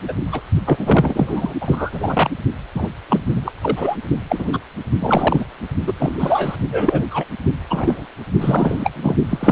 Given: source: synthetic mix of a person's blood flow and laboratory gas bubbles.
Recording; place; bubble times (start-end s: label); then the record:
Doppler ultrasound of blood flow; precordium
0.08-0.14 s: bubbles
0.31-0.41 s: bubbles
0.66-1.54 s: bubbles
1.61-2.30 s: bubbles
2.74-2.88 s: bubbles
3.08-3.22 s: bubbles
3.35-3.52 s: bubbles
3.61-3.97 s: bubbles
4.29-4.60 s: bubbles
5.00-5.46 s: bubbles
5.87-5.93 s: bubbles
5.99-6.56 s: bubbles
6.72-7.05 s: bubbles
7.11-7.25 s: bubbles
7.70-8.05 s: bubbles
8.39-8.91 s: bubbles
8.96-9.16 s: bubbles
9.29-9.52 s: bubbles
From the record:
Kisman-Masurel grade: 243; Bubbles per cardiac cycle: several, 3 to 8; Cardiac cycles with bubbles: 100%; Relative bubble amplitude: loud (0.450 to 0.775); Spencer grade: 3 (all of the cardiac periods contain showers or single bubble signals, but not dominating or overriding the cardiac motion signals); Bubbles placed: only in the low amplitude regions of the cardiac cycle